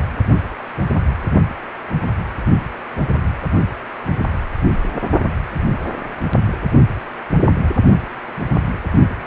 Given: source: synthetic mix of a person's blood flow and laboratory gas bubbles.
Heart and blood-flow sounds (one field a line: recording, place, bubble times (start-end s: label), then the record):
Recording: Doppler ultrasound of blood flow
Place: precordium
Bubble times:
no bubbles
From the record:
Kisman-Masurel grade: 000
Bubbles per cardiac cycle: 0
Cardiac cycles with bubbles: 0%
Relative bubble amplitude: no bubbles discernible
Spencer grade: 0 (complete lack of bubble signals)